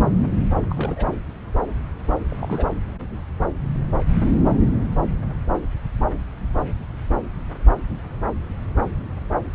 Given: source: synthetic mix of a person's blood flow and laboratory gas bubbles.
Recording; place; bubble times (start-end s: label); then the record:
Doppler ultrasound of blood flow; subclavian vein
0.69-1.08 s: bubbles
2.29-2.70 s: bubbles
From the record:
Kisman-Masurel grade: 221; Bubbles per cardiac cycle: several, 3 to 8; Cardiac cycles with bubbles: 10 to 50%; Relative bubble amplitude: barely perceptible (0.100 to 0.250); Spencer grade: 2 (many but less than half of the cardiac periods contain bubble signals, singularly or in groups); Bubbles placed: anywhere in the cardiac cycle